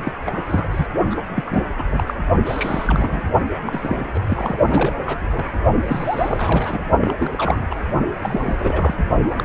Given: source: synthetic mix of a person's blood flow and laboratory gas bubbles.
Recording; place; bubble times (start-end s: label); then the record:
Doppler ultrasound of blood flow; precordium
0.04-0.12 s: bubbles
0.25-0.68 s: bubbles
0.71-0.86 s: bubbles
1.10-1.16 s: bubbles
1.35-1.64 s: bubbles
1.76-1.84 s: bubbles
1.89-2.04 s: bubbles
2.07-2.14 s: bubbles
2.44-3.23 s: bubbles
3.66-4.19 s: bubbles
4.27-4.57 s: bubbles
4.67-4.93 s: bubbles
4.96-5.46 s: bubbles
5.81-6.82 s: bubbles
7.00-7.14 s: bubbles
7.19-7.67 s: bubbles
7.70-7.75 s: bubbles
8.20-8.94 s: bubbles
9.22-9.35 s: bubbles
9.38-9.45 s: bubbles
From the record:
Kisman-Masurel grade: 342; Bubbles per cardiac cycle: rolling drumbeat, 9 or more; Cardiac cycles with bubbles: 100%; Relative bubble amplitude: moderate (0.250 to 0.450); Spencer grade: 3 (all of the cardiac periods contain showers or single bubble signals, but not dominating or overriding the cardiac motion signals); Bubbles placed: only in the low amplitude regions of the cardiac cycle